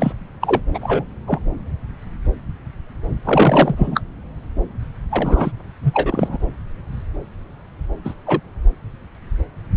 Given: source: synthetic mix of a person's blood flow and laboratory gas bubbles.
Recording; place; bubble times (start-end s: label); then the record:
Doppler ultrasound of blood flow; subclavian vein
0.00-0.12 s: bubbles
0.41-0.61 s: bubbles
0.74-0.79 s: bubbles
0.83-1.04 s: bubbles
1.27-1.40 s: bubbles
3.23-4.00 s: bubbles
5.10-5.52 s: bubbles
5.84-6.38 s: bubbles
8.04-8.14 s: bubbles
8.27-8.41 s: bubbles
From the record:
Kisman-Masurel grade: 223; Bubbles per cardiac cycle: several, 3 to 8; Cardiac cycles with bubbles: 10 to 50%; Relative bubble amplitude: loud (0.450 to 0.775); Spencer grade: 2 (many but less than half of the cardiac periods contain bubble signals, singularly or in groups); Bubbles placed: anywhere in the cardiac cycle